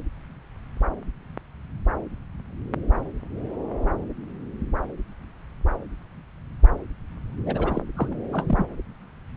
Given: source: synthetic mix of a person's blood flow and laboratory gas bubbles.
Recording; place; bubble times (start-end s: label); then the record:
Doppler ultrasound of blood flow; subclavian vein
7.46-7.82 s: bubbles
7.95-8.16 s: bubbles
8.32-8.68 s: bubbles
From the record:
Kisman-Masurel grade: 211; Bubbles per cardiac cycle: several, 3 to 8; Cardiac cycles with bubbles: 1 to 10%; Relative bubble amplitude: barely perceptible (0.100 to 0.250); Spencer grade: 1 (occasional bubble signal discernible with the cardiac motion signal, with majority of cardiac periods free of bubbles); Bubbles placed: anywhere in the cardiac cycle